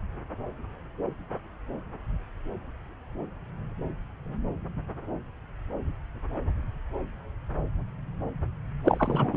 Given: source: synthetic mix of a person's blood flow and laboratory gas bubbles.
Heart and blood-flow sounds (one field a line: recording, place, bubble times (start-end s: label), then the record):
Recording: Doppler ultrasound of blood flow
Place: subclavian vein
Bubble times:
8.84-9.37 s: bubbles
From the record:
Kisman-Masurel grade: 212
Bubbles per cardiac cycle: several, 3 to 8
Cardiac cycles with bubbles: 1 to 10%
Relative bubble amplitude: moderate (0.250 to 0.450)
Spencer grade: 1 (occasional bubble signal discernible with the cardiac motion signal, with majority of cardiac periods free of bubbles)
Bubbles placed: anywhere in the cardiac cycle